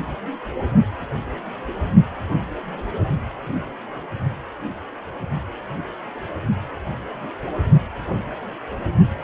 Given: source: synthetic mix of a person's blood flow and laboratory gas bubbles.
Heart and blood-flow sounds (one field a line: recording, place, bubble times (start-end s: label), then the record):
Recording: Doppler ultrasound of blood flow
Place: precordium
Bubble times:
no bubbles
From the record:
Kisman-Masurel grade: 000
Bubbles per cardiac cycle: 0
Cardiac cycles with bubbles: 0%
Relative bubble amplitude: no bubbles discernible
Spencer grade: 0 (complete lack of bubble signals)